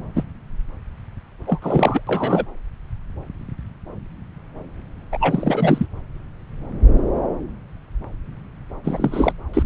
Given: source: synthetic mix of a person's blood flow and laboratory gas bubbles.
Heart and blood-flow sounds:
Doppler ultrasound of blood flow; subclavian vein
0.15-0.23 s: bubbles
1.46-1.59 s: bubbles
1.62-2.02 s: bubbles
2.07-2.46 s: bubbles
5.11-5.86 s: bubbles
8.84-9.32 s: bubbles
9.54-9.63 s: bubbles
From the record:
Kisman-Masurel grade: 333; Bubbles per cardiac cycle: rolling drumbeat, 9 or more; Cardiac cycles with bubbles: 50 to 99%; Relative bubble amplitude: loud (0.450 to 0.775); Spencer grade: 3 (all of the cardiac periods contain showers or single bubble signals, but not dominating or overriding the cardiac motion signals); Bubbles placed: anywhere in the cardiac cycle

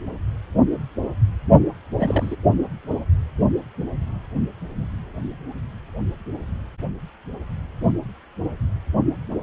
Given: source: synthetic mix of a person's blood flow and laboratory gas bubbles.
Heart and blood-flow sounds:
Doppler ultrasound of blood flow; precordium
1.99-2.35 s: bubbles
From the record:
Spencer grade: 1 (occasional bubble signal discernible with the cardiac motion signal, with majority of cardiac periods free of bubbles); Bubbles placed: only in the low amplitude regions of the cardiac cycle

